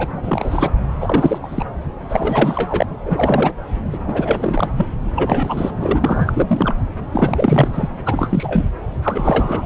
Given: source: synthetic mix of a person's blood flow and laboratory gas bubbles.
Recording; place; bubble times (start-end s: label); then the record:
Doppler ultrasound of blood flow; subclavian vein
0.00-0.71 s: bubbles
1.00-1.39 s: bubbles
1.43-1.65 s: bubbles
2.08-2.86 s: bubbles
3.06-3.52 s: bubbles
3.91-3.98 s: bubbles
4.08-4.73 s: bubbles
4.78-4.87 s: bubbles
5.15-6.75 s: bubbles
7.12-7.89 s: bubbles
8.05-8.66 s: bubbles
9.02-9.66 s: bubbles
From the record:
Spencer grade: 3 (all of the cardiac periods contain showers or single bubble signals, but not dominating or overriding the cardiac motion signals); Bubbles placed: anywhere in the cardiac cycle